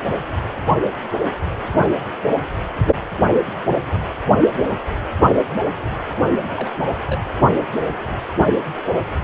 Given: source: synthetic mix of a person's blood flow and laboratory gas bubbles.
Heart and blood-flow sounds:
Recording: Doppler ultrasound of blood flow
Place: precordium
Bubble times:
6.43-6.69 s: bubbles
6.93-6.99 s: bubbles
7.07-7.21 s: bubbles
From the record:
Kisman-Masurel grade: 221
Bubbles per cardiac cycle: several, 3 to 8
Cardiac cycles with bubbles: 10 to 50%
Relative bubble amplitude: barely perceptible (0.100 to 0.250)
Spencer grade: 2 (many but less than half of the cardiac periods contain bubble signals, singularly or in groups)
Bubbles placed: only in the low amplitude regions of the cardiac cycle

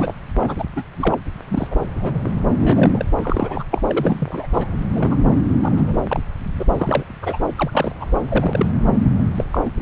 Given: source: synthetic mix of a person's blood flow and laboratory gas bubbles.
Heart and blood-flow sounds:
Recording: Doppler ultrasound of blood flow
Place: subclavian vein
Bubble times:
0.00-0.14 s: bubbles
0.39-0.65 s: bubbles
0.76-0.84 s: bubbles
0.98-1.15 s: bubbles
1.49-1.67 s: bubbles
1.70-1.75 s: bubbles
1.99-2.20 s: bubbles
2.24-2.30 s: bubbles
2.56-3.04 s: bubbles
3.17-3.63 s: bubbles
3.71-3.81 s: bubbles
3.88-4.46 s: bubbles
4.54-4.67 s: bubbles
4.82-4.91 s: bubbles
4.94-5.17 s: bubbles
5.62-5.99 s: bubbles
6.08-6.23 s: bubbles
6.59-6.65 s: bubbles
6.75-7.04 s: bubbles
7.22-7.38 s: bubbles
7.57-7.92 s: bubbles
8.00-8.05 s: bubbles
8.29-8.66 s: bubbles
9.35-9.44 s: bubbles
9.52-9.61 s: bubbles
9.65-9.70 s: bubbles
9.79-9.82 s: bubbles
From the record:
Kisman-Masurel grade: 242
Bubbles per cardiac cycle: several, 3 to 8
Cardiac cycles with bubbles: 100%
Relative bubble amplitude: moderate (0.250 to 0.450)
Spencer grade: 3 (all of the cardiac periods contain showers or single bubble signals, but not dominating or overriding the cardiac motion signals)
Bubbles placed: anywhere in the cardiac cycle

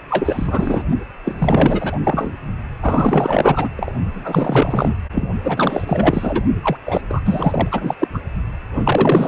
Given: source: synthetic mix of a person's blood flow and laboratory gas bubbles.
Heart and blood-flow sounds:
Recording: Doppler ultrasound of blood flow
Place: precordium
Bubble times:
0.09-0.83 s: bubbles
1.25-2.00 s: bubbles
2.04-2.32 s: bubbles
2.82-3.69 s: bubbles
3.76-3.92 s: bubbles
4.13-4.96 s: bubbles
5.12-5.28 s: bubbles
5.44-6.43 s: bubbles
6.62-6.76 s: bubbles
6.86-7.02 s: bubbles
7.09-7.21 s: bubbles
7.25-7.68 s: bubbles
7.71-7.94 s: bubbles
8.00-8.08 s: bubbles
8.14-8.19 s: bubbles
8.73-9.28 s: bubbles
From the record:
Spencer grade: 4 (maximum detectable bubble signal sounding continuously throughout systole and diastole of every cardiac period, and overriding the amplitude of the normal cardiac signals)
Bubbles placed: only in the low amplitude regions of the cardiac cycle

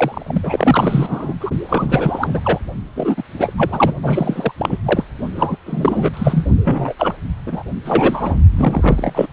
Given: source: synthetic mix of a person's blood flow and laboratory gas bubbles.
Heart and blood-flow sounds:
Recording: Doppler ultrasound of blood flow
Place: precordium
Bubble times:
0.00-1.34 s: bubbles
1.40-1.50 s: bubbles
1.69-2.40 s: bubbles
2.44-2.59 s: bubbles
2.96-3.23 s: bubbles
3.38-3.53 s: bubbles
3.56-3.93 s: bubbles
4.03-4.52 s: bubbles
4.57-4.78 s: bubbles
4.86-5.04 s: bubbles
5.35-5.56 s: bubbles
5.65-6.11 s: bubbles
6.13-6.46 s: bubbles
6.64-6.94 s: bubbles
6.98-7.13 s: bubbles
7.46-7.63 s: bubbles
7.85-8.39 s: bubbles
8.53-9.27 s: bubbles
From the record:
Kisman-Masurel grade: 343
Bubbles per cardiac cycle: rolling drumbeat, 9 or more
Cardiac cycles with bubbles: 100%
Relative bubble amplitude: loud (0.450 to 0.775)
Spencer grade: 3 (all of the cardiac periods contain showers or single bubble signals, but not dominating or overriding the cardiac motion signals)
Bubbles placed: only in the low amplitude regions of the cardiac cycle

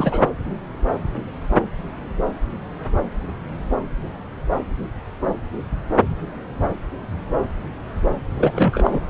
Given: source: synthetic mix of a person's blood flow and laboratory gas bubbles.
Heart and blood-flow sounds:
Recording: Doppler ultrasound of blood flow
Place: subclavian vein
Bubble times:
0.00-0.26 s: bubbles
8.38-9.00 s: bubbles
From the record:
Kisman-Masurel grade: 222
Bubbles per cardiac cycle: several, 3 to 8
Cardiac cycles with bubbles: 10 to 50%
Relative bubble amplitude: moderate (0.250 to 0.450)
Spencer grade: 2 (many but less than half of the cardiac periods contain bubble signals, singularly or in groups)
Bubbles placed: anywhere in the cardiac cycle

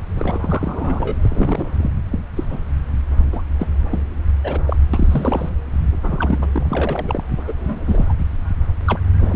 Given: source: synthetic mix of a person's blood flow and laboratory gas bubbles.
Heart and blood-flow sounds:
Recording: Doppler ultrasound of blood flow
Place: subclavian vein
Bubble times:
0.19-1.16 s: bubbles
1.22-1.67 s: bubbles
1.78-1.95 s: bubbles
2.10-2.19 s: bubbles
2.36-2.46 s: bubbles
2.50-2.59 s: bubbles
3.32-3.42 s: bubbles
3.59-3.67 s: bubbles
3.90-4.00 s: bubbles
4.43-4.59 s: bubbles
4.65-4.76 s: bubbles
4.93-5.49 s: bubbles
6.02-6.47 s: bubbles
6.52-6.67 s: bubbles
6.70-7.23 s: bubbles
7.47-7.52 s: bubbles
7.60-8.06 s: bubbles
8.09-8.13 s: bubbles
8.87-9.00 s: bubbles
9.20-9.36 s: bubbles
From the record:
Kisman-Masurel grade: 242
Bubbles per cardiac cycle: several, 3 to 8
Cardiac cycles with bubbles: 100%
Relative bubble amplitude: moderate (0.250 to 0.450)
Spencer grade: 3 (all of the cardiac periods contain showers or single bubble signals, but not dominating or overriding the cardiac motion signals)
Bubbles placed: anywhere in the cardiac cycle

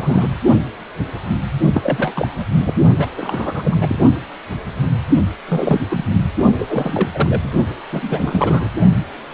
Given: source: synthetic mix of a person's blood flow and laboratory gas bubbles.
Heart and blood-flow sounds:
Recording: Doppler ultrasound of blood flow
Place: precordium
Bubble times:
0.00-0.29 s: bubbles
1.74-2.46 s: bubbles
2.50-2.73 s: bubbles
2.98-3.08 s: bubbles
3.17-3.98 s: bubbles
5.48-5.81 s: bubbles
5.90-6.05 s: bubbles
6.58-7.09 s: bubbles
7.14-7.40 s: bubbles
7.43-7.48 s: bubbles
7.91-8.68 s: bubbles
From the record:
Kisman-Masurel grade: 332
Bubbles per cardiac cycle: rolling drumbeat, 9 or more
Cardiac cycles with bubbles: 50 to 99%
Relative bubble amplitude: moderate (0.250 to 0.450)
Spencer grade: 3 (all of the cardiac periods contain showers or single bubble signals, but not dominating or overriding the cardiac motion signals)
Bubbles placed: only in the low amplitude regions of the cardiac cycle

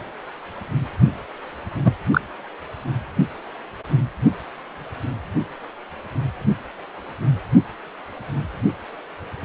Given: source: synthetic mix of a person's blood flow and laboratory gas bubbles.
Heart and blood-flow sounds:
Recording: Doppler ultrasound of blood flow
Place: precordium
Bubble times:
1.84-1.92 s: bubbles
2.11-2.21 s: bubbles
From the record:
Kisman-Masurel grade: 113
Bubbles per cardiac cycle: 1 to 2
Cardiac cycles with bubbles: 1 to 10%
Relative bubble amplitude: loud (0.450 to 0.775)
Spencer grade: 1 (occasional bubble signal discernible with the cardiac motion signal, with majority of cardiac periods free of bubbles)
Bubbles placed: only in the low amplitude regions of the cardiac cycle

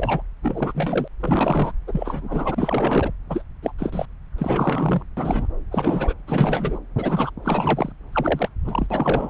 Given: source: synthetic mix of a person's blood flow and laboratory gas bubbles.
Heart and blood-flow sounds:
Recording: Doppler ultrasound of blood flow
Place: subclavian vein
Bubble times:
0.00-0.22 s: bubbles
0.42-1.08 s: bubbles
1.19-1.72 s: bubbles
1.87-3.10 s: bubbles
3.29-3.43 s: bubbles
3.62-3.72 s: bubbles
3.78-4.05 s: bubbles
4.38-5.02 s: bubbles
5.17-5.47 s: bubbles
5.71-6.14 s: bubbles
6.27-6.79 s: bubbles
6.96-7.30 s: bubbles
7.42-7.92 s: bubbles
8.12-8.49 s: bubbles
8.64-8.87 s: bubbles
8.90-9.30 s: bubbles
From the record:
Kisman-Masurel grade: 342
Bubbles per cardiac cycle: rolling drumbeat, 9 or more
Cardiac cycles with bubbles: 100%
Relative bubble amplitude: moderate (0.250 to 0.450)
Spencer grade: 3 (all of the cardiac periods contain showers or single bubble signals, but not dominating or overriding the cardiac motion signals)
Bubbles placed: anywhere in the cardiac cycle

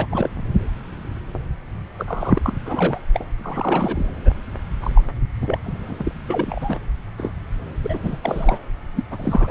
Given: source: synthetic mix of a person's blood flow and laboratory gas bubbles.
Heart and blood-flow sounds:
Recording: Doppler ultrasound of blood flow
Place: subclavian vein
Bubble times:
0.00-0.06 s: bubbles
0.11-0.30 s: bubbles
1.98-2.39 s: bubbles
2.44-2.53 s: bubbles
2.65-2.98 s: bubbles
3.14-3.27 s: bubbles
3.39-4.12 s: bubbles
4.25-4.34 s: bubbles
4.81-5.01 s: bubbles
5.41-5.58 s: bubbles
5.63-6.11 s: bubbles
6.28-6.79 s: bubbles
7.17-7.33 s: bubbles
7.83-8.16 s: bubbles
8.22-8.58 s: bubbles
8.95-9.04 s: bubbles
9.11-9.51 s: bubbles
From the record:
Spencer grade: 3 (all of the cardiac periods contain showers or single bubble signals, but not dominating or overriding the cardiac motion signals)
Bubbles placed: anywhere in the cardiac cycle

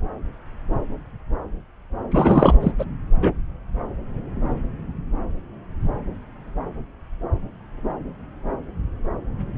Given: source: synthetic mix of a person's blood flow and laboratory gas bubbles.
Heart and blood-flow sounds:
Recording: Doppler ultrasound of blood flow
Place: subclavian vein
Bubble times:
2.11-2.56 s: bubbles
2.60-2.72 s: bubbles
2.79-2.85 s: bubbles
3.21-3.32 s: bubbles
From the record:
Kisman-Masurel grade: 223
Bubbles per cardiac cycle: several, 3 to 8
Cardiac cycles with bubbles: 10 to 50%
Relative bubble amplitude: loud (0.450 to 0.775)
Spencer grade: 2 (many but less than half of the cardiac periods contain bubble signals, singularly or in groups)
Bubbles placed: anywhere in the cardiac cycle

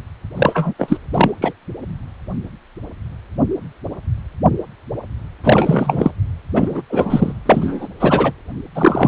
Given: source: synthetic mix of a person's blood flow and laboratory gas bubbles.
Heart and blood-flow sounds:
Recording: Doppler ultrasound of blood flow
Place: precordium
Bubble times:
0.37-0.74 s: bubbles
0.78-0.97 s: bubbles
1.12-1.32 s: bubbles
1.41-1.53 s: bubbles
5.44-6.12 s: bubbles
6.54-6.82 s: bubbles
6.90-7.33 s: bubbles
7.46-7.88 s: bubbles
7.99-8.31 s: bubbles
8.75-9.08 s: bubbles
From the record:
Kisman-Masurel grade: 333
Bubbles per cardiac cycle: rolling drumbeat, 9 or more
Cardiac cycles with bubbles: 50 to 99%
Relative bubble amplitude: loud (0.450 to 0.775)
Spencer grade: 3 (all of the cardiac periods contain showers or single bubble signals, but not dominating or overriding the cardiac motion signals)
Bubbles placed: anywhere in the cardiac cycle

